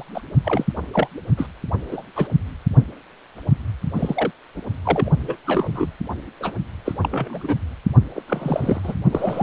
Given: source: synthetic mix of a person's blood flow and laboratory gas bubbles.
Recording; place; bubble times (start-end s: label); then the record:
Doppler ultrasound of blood flow; precordium
0.00-0.04 s: bubbles
0.15-0.22 s: bubbles
0.44-0.65 s: bubbles
0.93-1.07 s: bubbles
1.37-1.47 s: bubbles
1.90-2.02 s: bubbles
2.16-2.27 s: bubbles
3.94-4.31 s: bubbles
4.56-4.62 s: bubbles
4.84-5.10 s: bubbles
5.19-5.36 s: bubbles
5.46-5.92 s: bubbles
6.40-6.52 s: bubbles
6.85-6.93 s: bubbles
7.01-7.55 s: bubbles
8.15-8.23 s: bubbles
8.27-8.81 s: bubbles
8.84-8.94 s: bubbles
9.11-9.43 s: bubbles
From the record:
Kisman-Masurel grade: 232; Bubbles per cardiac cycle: several, 3 to 8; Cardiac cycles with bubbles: 50 to 99%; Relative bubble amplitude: moderate (0.250 to 0.450); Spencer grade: 3 (all of the cardiac periods contain showers or single bubble signals, but not dominating or overriding the cardiac motion signals); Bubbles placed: only in the low amplitude regions of the cardiac cycle